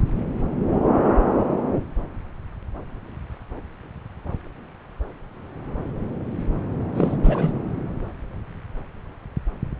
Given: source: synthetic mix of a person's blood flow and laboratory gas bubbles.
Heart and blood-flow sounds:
Doppler ultrasound of blood flow; subclavian vein
0.00-0.02 s: bubbles
6.95-7.17 s: bubbles
7.23-7.52 s: bubbles
From the record:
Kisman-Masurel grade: 222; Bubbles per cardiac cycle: several, 3 to 8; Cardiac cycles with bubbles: 10 to 50%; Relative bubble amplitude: moderate (0.250 to 0.450); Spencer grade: 2 (many but less than half of the cardiac periods contain bubble signals, singularly or in groups); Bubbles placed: anywhere in the cardiac cycle

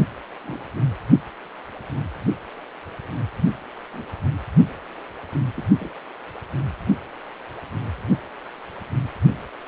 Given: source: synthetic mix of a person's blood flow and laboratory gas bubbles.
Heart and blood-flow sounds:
Doppler ultrasound of blood flow; precordium
0.43-0.61 s: bubbles
3.93-4.05 s: bubbles
5.56-5.63 s: bubbles
5.77-5.89 s: bubbles
From the record:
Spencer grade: 2 (many but less than half of the cardiac periods contain bubble signals, singularly or in groups); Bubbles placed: anywhere in the cardiac cycle

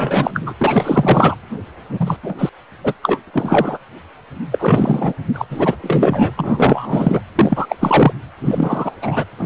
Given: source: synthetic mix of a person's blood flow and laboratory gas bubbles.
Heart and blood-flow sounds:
Doppler ultrasound of blood flow; precordium
0.00-0.53 s: bubbles
0.59-1.35 s: bubbles
1.89-2.17 s: bubbles
2.23-2.35 s: bubbles
2.38-2.50 s: bubbles
2.84-2.93 s: bubbles
3.02-3.19 s: bubbles
3.27-3.31 s: bubbles
3.33-3.78 s: bubbles
4.51-5.13 s: bubbles
5.33-5.44 s: bubbles
5.50-5.76 s: bubbles
5.83-6.32 s: bubbles
6.36-7.21 s: bubbles
7.35-7.66 s: bubbles
7.68-7.75 s: bubbles
7.80-8.14 s: bubbles
8.41-8.92 s: bubbles
9.02-9.25 s: bubbles
9.39-9.45 s: bubbles
From the record:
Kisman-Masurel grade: 343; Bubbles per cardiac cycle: rolling drumbeat, 9 or more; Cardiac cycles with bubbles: 100%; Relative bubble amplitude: loud (0.450 to 0.775); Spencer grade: 3 (all of the cardiac periods contain showers or single bubble signals, but not dominating or overriding the cardiac motion signals); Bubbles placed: anywhere in the cardiac cycle

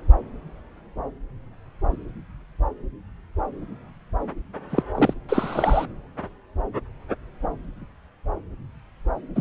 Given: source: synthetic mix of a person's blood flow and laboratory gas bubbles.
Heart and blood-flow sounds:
Doppler ultrasound of blood flow; subclavian vein
4.70-4.83 s: bubbles
4.94-5.13 s: bubbles
5.28-5.85 s: bubbles
9.36-9.41 s: bubbles
From the record:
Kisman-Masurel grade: 212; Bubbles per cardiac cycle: several, 3 to 8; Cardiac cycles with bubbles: 1 to 10%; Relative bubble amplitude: moderate (0.250 to 0.450); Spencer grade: 1 (occasional bubble signal discernible with the cardiac motion signal, with majority of cardiac periods free of bubbles); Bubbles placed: anywhere in the cardiac cycle

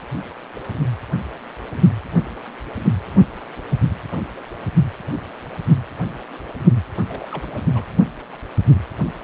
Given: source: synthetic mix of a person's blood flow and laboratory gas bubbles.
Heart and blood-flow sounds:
Doppler ultrasound of blood flow; precordium
7.06-7.58 s: bubbles
7.75-7.84 s: bubbles
From the record:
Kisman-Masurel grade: 211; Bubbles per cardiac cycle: several, 3 to 8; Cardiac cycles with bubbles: 1 to 10%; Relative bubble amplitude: barely perceptible (0.100 to 0.250); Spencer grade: 1 (occasional bubble signal discernible with the cardiac motion signal, with majority of cardiac periods free of bubbles); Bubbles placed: anywhere in the cardiac cycle

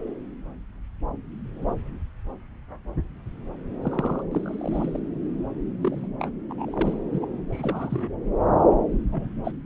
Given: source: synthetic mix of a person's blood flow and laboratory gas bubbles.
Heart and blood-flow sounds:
Doppler ultrasound of blood flow; subclavian vein
3.85-4.23 s: bubbles
4.31-4.99 s: bubbles
5.81-6.07 s: bubbles
6.19-6.31 s: bubbles
6.50-6.99 s: bubbles
7.12-7.26 s: bubbles
7.52-8.08 s: bubbles
9.12-9.29 s: bubbles
9.45-9.52 s: bubbles
From the record:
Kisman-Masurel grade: 221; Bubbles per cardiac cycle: several, 3 to 8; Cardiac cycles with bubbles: 10 to 50%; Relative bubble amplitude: barely perceptible (0.100 to 0.250); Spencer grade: 2 (many but less than half of the cardiac periods contain bubble signals, singularly or in groups); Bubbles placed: anywhere in the cardiac cycle

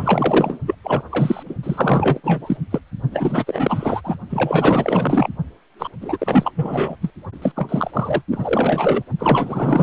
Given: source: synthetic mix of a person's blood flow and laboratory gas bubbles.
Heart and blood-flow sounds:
Doppler ultrasound of blood flow; precordium
0.00-0.59 s: bubbles
0.66-0.74 s: bubbles
0.83-1.02 s: bubbles
1.09-1.43 s: bubbles
1.45-1.55 s: bubbles
1.63-2.21 s: bubbles
2.24-2.57 s: bubbles
2.71-2.80 s: bubbles
3.11-4.01 s: bubbles
4.04-4.17 s: bubbles
4.29-5.30 s: bubbles
5.78-5.88 s: bubbles
6.01-6.51 s: bubbles
6.54-6.96 s: bubbles
7.01-7.10 s: bubbles
7.42-7.52 s: bubbles
7.55-8.22 s: bubbles
8.30-9.03 s: bubbles
9.19-9.83 s: bubbles
From the record:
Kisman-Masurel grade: 444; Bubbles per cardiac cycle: continuous sound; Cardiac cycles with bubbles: 100%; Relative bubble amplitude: maximal (0.775 to 0.999); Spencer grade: 4 (maximum detectable bubble signal sounding continuously throughout systole and diastole of every cardiac period, and overriding the amplitude of the normal cardiac signals); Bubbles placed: only in the low amplitude regions of the cardiac cycle

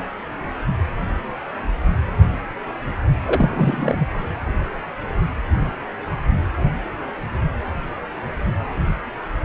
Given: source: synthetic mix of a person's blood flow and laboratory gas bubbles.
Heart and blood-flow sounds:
Doppler ultrasound of blood flow; precordium
3.26-4.07 s: bubbles
From the record:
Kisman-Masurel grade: 212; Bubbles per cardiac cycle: several, 3 to 8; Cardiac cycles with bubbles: 1 to 10%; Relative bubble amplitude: moderate (0.250 to 0.450); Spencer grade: 1 (occasional bubble signal discernible with the cardiac motion signal, with majority of cardiac periods free of bubbles); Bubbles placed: anywhere in the cardiac cycle

